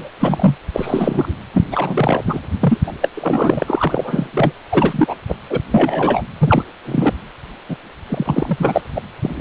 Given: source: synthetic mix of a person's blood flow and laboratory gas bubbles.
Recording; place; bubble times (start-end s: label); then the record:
Doppler ultrasound of blood flow; precordium
0.00-0.11 s: bubbles
0.20-0.55 s: bubbles
0.73-1.33 s: bubbles
1.53-1.68 s: bubbles
1.72-2.22 s: bubbles
2.27-2.40 s: bubbles
2.60-2.79 s: bubbles
2.87-2.93 s: bubbles
3.00-3.09 s: bubbles
3.14-4.52 s: bubbles
4.71-5.15 s: bubbles
5.28-5.36 s: bubbles
5.49-5.61 s: bubbles
5.71-6.22 s: bubbles
6.40-6.64 s: bubbles
6.85-7.14 s: bubbles
7.69-7.76 s: bubbles
8.08-8.81 s: bubbles
8.95-9.01 s: bubbles
9.21-9.41 s: bubbles
From the record:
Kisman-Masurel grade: 243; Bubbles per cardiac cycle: several, 3 to 8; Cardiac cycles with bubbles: 100%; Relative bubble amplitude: loud (0.450 to 0.775); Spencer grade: 3 (all of the cardiac periods contain showers or single bubble signals, but not dominating or overriding the cardiac motion signals); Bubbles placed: anywhere in the cardiac cycle